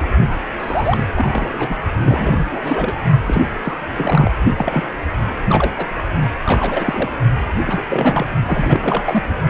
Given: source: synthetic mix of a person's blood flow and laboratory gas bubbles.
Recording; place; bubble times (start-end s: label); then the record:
Doppler ultrasound of blood flow; precordium
0.00-0.09 s: bubbles
0.58-1.77 s: bubbles
1.92-2.46 s: bubbles
2.50-2.95 s: bubbles
3.26-3.46 s: bubbles
3.63-3.79 s: bubbles
3.96-4.31 s: bubbles
4.57-4.89 s: bubbles
5.48-5.73 s: bubbles
5.77-5.86 s: bubbles
6.45-7.10 s: bubbles
7.65-7.86 s: bubbles
7.88-8.26 s: bubbles
8.45-9.22 s: bubbles
From the record:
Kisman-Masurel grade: 342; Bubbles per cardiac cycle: rolling drumbeat, 9 or more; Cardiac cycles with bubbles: 100%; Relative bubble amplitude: moderate (0.250 to 0.450); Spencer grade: 3 (all of the cardiac periods contain showers or single bubble signals, but not dominating or overriding the cardiac motion signals); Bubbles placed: only in the low amplitude regions of the cardiac cycle